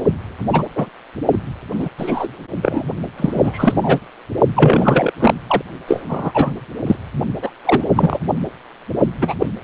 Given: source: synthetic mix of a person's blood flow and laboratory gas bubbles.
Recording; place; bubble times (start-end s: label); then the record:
Doppler ultrasound of blood flow; precordium
0.00-0.02 s: bubbles
0.52-0.64 s: bubbles
0.75-0.89 s: bubbles
1.31-1.39 s: bubbles
1.73-1.89 s: bubbles
1.98-2.28 s: bubbles
2.61-2.84 s: bubbles
3.17-4.00 s: bubbles
4.55-5.12 s: bubbles
5.20-5.33 s: bubbles
5.48-5.62 s: bubbles
5.88-6.03 s: bubbles
6.08-6.58 s: bubbles
6.86-6.96 s: bubbles
7.42-7.51 s: bubbles
7.65-7.84 s: bubbles
7.96-8.19 s: bubbles
9.21-9.34 s: bubbles
9.39-9.47 s: bubbles
From the record:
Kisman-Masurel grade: 243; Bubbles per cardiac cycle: several, 3 to 8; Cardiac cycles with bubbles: 100%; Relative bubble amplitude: loud (0.450 to 0.775); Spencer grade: 3 (all of the cardiac periods contain showers or single bubble signals, but not dominating or overriding the cardiac motion signals); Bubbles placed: only in the low amplitude regions of the cardiac cycle